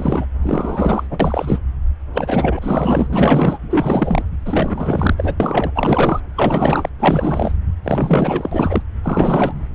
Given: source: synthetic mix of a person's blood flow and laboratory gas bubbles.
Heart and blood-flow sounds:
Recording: Doppler ultrasound of blood flow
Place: subclavian vein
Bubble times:
0.00-0.26 s: bubbles
0.42-1.07 s: bubbles
1.10-1.58 s: bubbles
2.13-3.58 s: bubbles
3.69-4.24 s: bubbles
4.45-5.15 s: bubbles
5.17-5.35 s: bubbles
5.40-5.72 s: bubbles
5.74-6.20 s: bubbles
6.37-6.89 s: bubbles
6.99-7.54 s: bubbles
7.83-8.82 s: bubbles
9.04-9.63 s: bubbles
From the record:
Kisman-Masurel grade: 444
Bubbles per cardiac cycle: continuous sound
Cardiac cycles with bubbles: 100%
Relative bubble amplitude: maximal (0.775 to 0.999)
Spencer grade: 4 (maximum detectable bubble signal sounding continuously throughout systole and diastole of every cardiac period, and overriding the amplitude of the normal cardiac signals)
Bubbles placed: anywhere in the cardiac cycle

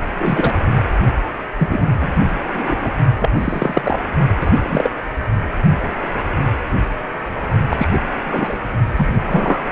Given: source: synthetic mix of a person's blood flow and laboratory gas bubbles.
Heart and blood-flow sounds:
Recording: Doppler ultrasound of blood flow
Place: precordium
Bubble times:
0.18-0.53 s: bubbles
1.59-2.23 s: bubbles
2.54-2.91 s: bubbles
3.20-3.29 s: bubbles
3.33-3.99 s: bubbles
4.40-4.92 s: bubbles
7.71-7.88 s: bubbles
7.93-7.99 s: bubbles
8.25-8.57 s: bubbles
8.96-9.14 s: bubbles
9.25-9.60 s: bubbles
From the record:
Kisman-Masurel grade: 233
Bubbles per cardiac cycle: several, 3 to 8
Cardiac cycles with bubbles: 50 to 99%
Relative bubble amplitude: loud (0.450 to 0.775)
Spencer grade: 3 (all of the cardiac periods contain showers or single bubble signals, but not dominating or overriding the cardiac motion signals)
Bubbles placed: only in the low amplitude regions of the cardiac cycle

